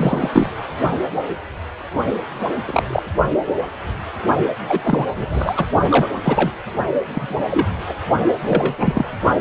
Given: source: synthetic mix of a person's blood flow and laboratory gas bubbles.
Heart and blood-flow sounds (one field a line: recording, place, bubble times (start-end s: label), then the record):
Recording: Doppler ultrasound of blood flow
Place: precordium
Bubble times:
0.00-0.49 s: bubbles
2.66-3.02 s: bubbles
4.68-5.06 s: bubbles
5.15-5.65 s: bubbles
5.89-6.10 s: bubbles
6.21-6.52 s: bubbles
7.04-7.37 s: bubbles
7.50-7.66 s: bubbles
7.88-7.95 s: bubbles
8.28-8.33 s: bubbles
8.42-9.21 s: bubbles
From the record:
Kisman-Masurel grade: 233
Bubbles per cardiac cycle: several, 3 to 8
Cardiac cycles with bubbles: 50 to 99%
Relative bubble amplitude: loud (0.450 to 0.775)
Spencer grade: 3 (all of the cardiac periods contain showers or single bubble signals, but not dominating or overriding the cardiac motion signals)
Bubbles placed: only in the low amplitude regions of the cardiac cycle